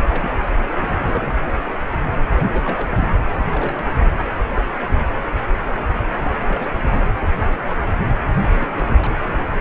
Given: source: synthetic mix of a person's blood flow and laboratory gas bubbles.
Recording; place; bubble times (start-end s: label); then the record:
Doppler ultrasound of blood flow; precordium
0.04-0.32 s: bubbles
0.62-0.97 s: bubbles
1.00-1.33 s: bubbles
2.33-3.07 s: bubbles
3.36-3.44 s: bubbles
3.52-3.85 s: bubbles
4.06-4.11 s: bubbles
6.17-6.34 s: bubbles
6.48-6.67 s: bubbles
6.73-7.04 s: bubbles
8.25-8.30 s: bubbles
8.38-9.17 s: bubbles
9.24-9.45 s: bubbles
9.50-9.61 s: bubbles
From the record:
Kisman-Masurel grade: 221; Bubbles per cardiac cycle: several, 3 to 8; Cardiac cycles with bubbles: 10 to 50%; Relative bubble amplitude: barely perceptible (0.100 to 0.250); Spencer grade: 2 (many but less than half of the cardiac periods contain bubble signals, singularly or in groups); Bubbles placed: anywhere in the cardiac cycle